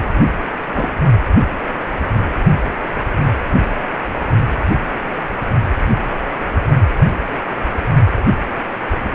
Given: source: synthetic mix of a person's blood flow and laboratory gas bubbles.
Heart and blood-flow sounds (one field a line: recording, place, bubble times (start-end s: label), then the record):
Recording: Doppler ultrasound of blood flow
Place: precordium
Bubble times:
0.74-0.91 s: bubbles
From the record:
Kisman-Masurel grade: 112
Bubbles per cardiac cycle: 1 to 2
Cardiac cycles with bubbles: 1 to 10%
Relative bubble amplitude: moderate (0.250 to 0.450)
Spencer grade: 1 (occasional bubble signal discernible with the cardiac motion signal, with majority of cardiac periods free of bubbles)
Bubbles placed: only in the low amplitude regions of the cardiac cycle